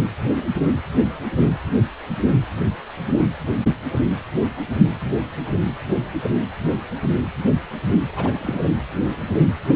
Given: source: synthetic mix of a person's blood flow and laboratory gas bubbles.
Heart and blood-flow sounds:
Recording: Doppler ultrasound of blood flow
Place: precordium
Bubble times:
8.15-8.65 s: bubbles
From the record:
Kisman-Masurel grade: 221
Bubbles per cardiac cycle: several, 3 to 8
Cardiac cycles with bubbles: 10 to 50%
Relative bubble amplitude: barely perceptible (0.100 to 0.250)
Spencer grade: 2 (many but less than half of the cardiac periods contain bubble signals, singularly or in groups)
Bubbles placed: anywhere in the cardiac cycle

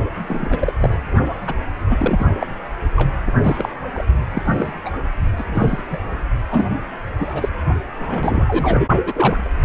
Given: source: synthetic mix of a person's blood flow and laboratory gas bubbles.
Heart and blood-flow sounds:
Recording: Doppler ultrasound of blood flow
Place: precordium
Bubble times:
0.15-0.26 s: bubbles
0.28-0.72 s: bubbles
0.81-0.98 s: bubbles
1.47-1.55 s: bubbles
1.90-2.26 s: bubbles
2.39-2.47 s: bubbles
2.96-3.12 s: bubbles
3.27-3.33 s: bubbles
3.42-3.69 s: bubbles
3.94-4.04 s: bubbles
4.31-4.73 s: bubbles
4.85-4.90 s: bubbles
5.37-5.44 s: bubbles
5.47-6.11 s: bubbles
6.52-6.69 s: bubbles
7.18-7.49 s: bubbles
7.99-8.87 s: bubbles
9.05-9.50 s: bubbles
From the record:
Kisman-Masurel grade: 242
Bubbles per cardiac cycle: several, 3 to 8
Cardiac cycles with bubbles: 100%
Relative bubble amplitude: moderate (0.250 to 0.450)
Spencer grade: 3 (all of the cardiac periods contain showers or single bubble signals, but not dominating or overriding the cardiac motion signals)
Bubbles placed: only in the low amplitude regions of the cardiac cycle

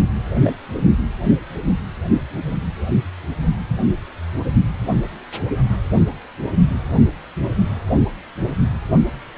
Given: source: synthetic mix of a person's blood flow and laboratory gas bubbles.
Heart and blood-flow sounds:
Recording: Doppler ultrasound of blood flow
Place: precordium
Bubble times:
0.43-0.54 s: bubbles
From the record:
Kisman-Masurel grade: 113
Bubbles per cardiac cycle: 1 to 2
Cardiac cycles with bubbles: 1 to 10%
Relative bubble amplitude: loud (0.450 to 0.775)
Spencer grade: 1 (occasional bubble signal discernible with the cardiac motion signal, with majority of cardiac periods free of bubbles)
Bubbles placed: only in the low amplitude regions of the cardiac cycle

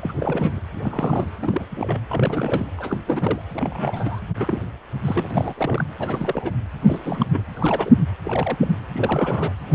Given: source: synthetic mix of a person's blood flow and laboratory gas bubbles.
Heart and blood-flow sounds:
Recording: Doppler ultrasound of blood flow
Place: precordium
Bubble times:
0.00-0.13 s: bubbles
0.19-0.60 s: bubbles
0.74-0.81 s: bubbles
0.83-1.31 s: bubbles
1.40-1.65 s: bubbles
1.71-2.01 s: bubbles
2.08-2.67 s: bubbles
2.77-2.98 s: bubbles
3.06-3.42 s: bubbles
3.54-4.20 s: bubbles
4.36-4.62 s: bubbles
5.04-5.54 s: bubbles
5.57-5.86 s: bubbles
6.00-6.51 s: bubbles
6.83-7.26 s: bubbles
7.33-7.43 s: bubbles
7.54-7.92 s: bubbles
8.24-8.57 s: bubbles
8.61-8.68 s: bubbles
8.93-9.53 s: bubbles
9.70-9.75 s: bubbles
From the record:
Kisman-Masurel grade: 342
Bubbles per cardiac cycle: rolling drumbeat, 9 or more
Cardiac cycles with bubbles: 100%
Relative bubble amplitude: moderate (0.250 to 0.450)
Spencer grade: 3 (all of the cardiac periods contain showers or single bubble signals, but not dominating or overriding the cardiac motion signals)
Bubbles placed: anywhere in the cardiac cycle

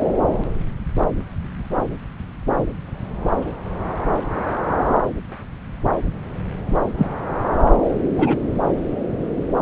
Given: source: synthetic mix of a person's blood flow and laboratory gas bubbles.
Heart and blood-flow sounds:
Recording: Doppler ultrasound of blood flow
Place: subclavian vein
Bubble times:
6.98-7.07 s: bubbles
8.18-8.37 s: bubbles
From the record:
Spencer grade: 2 (many but less than half of the cardiac periods contain bubble signals, singularly or in groups)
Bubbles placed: anywhere in the cardiac cycle

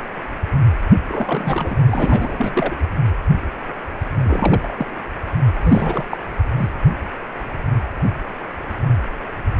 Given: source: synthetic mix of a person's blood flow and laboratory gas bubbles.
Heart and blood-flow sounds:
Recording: Doppler ultrasound of blood flow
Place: precordium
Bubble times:
0.91-0.95 s: bubbles
1.08-1.83 s: bubbles
1.86-2.76 s: bubbles
4.23-4.86 s: bubbles
5.61-6.07 s: bubbles
6.10-6.18 s: bubbles
6.57-6.69 s: bubbles
From the record:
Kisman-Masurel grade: 332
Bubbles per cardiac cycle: rolling drumbeat, 9 or more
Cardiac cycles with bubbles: 50 to 99%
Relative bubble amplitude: moderate (0.250 to 0.450)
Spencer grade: 3 (all of the cardiac periods contain showers or single bubble signals, but not dominating or overriding the cardiac motion signals)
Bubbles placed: anywhere in the cardiac cycle

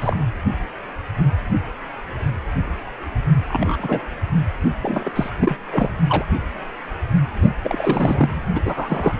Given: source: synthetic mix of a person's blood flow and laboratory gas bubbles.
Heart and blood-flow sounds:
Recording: Doppler ultrasound of blood flow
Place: precordium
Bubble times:
0.00-0.17 s: bubbles
3.48-4.05 s: bubbles
4.82-5.12 s: bubbles
5.16-5.30 s: bubbles
5.39-5.56 s: bubbles
5.70-5.97 s: bubbles
6.08-6.25 s: bubbles
7.64-8.42 s: bubbles
8.54-8.61 s: bubbles
8.65-9.14 s: bubbles
From the record:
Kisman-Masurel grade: 222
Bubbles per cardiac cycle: several, 3 to 8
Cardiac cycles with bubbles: 10 to 50%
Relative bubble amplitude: moderate (0.250 to 0.450)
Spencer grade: 2 (many but less than half of the cardiac periods contain bubble signals, singularly or in groups)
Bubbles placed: anywhere in the cardiac cycle

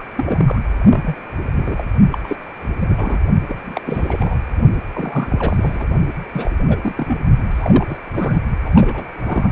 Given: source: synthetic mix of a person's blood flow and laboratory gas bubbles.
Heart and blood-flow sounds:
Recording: Doppler ultrasound of blood flow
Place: precordium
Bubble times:
0.00-0.04 s: bubbles
0.16-0.60 s: bubbles
0.78-1.15 s: bubbles
1.57-1.84 s: bubbles
2.10-2.18 s: bubbles
2.24-2.37 s: bubbles
2.80-3.22 s: bubbles
3.48-3.81 s: bubbles
3.85-4.42 s: bubbles
4.92-5.87 s: bubbles
6.32-6.56 s: bubbles
6.68-6.77 s: bubbles
6.81-7.21 s: bubbles
7.50-7.98 s: bubbles
8.12-8.39 s: bubbles
8.64-8.70 s: bubbles
8.74-9.09 s: bubbles
9.17-9.52 s: bubbles
From the record:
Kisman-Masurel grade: 342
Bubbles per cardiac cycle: rolling drumbeat, 9 or more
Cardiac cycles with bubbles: 100%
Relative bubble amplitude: moderate (0.250 to 0.450)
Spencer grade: 3 (all of the cardiac periods contain showers or single bubble signals, but not dominating or overriding the cardiac motion signals)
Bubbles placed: only in the low amplitude regions of the cardiac cycle

